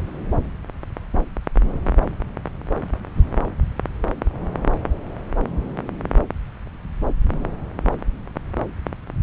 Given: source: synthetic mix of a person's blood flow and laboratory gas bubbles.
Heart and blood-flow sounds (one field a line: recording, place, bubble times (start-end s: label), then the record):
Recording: Doppler ultrasound of blood flow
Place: subclavian vein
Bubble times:
no bubbles
From the record:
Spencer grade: 0 (complete lack of bubble signals)